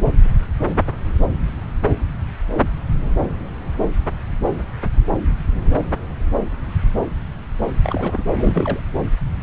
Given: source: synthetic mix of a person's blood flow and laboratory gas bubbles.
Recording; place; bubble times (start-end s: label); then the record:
Doppler ultrasound of blood flow; subclavian vein
7.83-8.23 s: bubbles
8.34-8.80 s: bubbles
From the record:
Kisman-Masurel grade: 211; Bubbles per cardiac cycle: several, 3 to 8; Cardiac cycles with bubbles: 1 to 10%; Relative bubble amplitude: barely perceptible (0.100 to 0.250); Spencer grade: 1 (occasional bubble signal discernible with the cardiac motion signal, with majority of cardiac periods free of bubbles); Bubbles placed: anywhere in the cardiac cycle